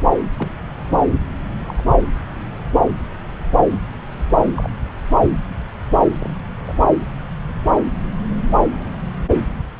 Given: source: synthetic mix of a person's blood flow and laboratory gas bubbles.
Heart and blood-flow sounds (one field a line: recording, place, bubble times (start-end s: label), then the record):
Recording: Doppler ultrasound of blood flow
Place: subclavian vein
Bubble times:
0.39-0.59 s: bubbles
1.66-1.74 s: bubbles
1.77-1.84 s: bubbles
4.56-4.70 s: bubbles
6.19-6.30 s: bubbles
6.66-6.75 s: bubbles
From the record:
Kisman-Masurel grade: 121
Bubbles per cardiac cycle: 1 to 2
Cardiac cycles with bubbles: 10 to 50%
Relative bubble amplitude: barely perceptible (0.100 to 0.250)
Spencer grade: 2 (many but less than half of the cardiac periods contain bubble signals, singularly or in groups)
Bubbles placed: anywhere in the cardiac cycle